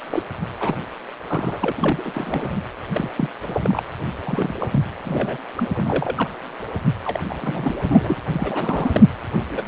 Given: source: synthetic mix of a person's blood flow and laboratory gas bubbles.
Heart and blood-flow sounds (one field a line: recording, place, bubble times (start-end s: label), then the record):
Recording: Doppler ultrasound of blood flow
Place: precordium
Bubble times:
0.10-0.23 s: bubbles
0.59-0.77 s: bubbles
1.27-1.72 s: bubbles
1.77-2.62 s: bubbles
2.94-3.11 s: bubbles
3.16-3.29 s: bubbles
3.42-3.83 s: bubbles
4.25-4.53 s: bubbles
4.59-4.68 s: bubbles
4.72-4.83 s: bubbles
5.04-5.38 s: bubbles
5.57-6.29 s: bubbles
7.04-7.20 s: bubbles
7.29-7.36 s: bubbles
7.42-8.14 s: bubbles
8.31-9.04 s: bubbles
9.52-9.63 s: bubbles
From the record:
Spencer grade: 3 (all of the cardiac periods contain showers or single bubble signals, but not dominating or overriding the cardiac motion signals)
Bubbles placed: anywhere in the cardiac cycle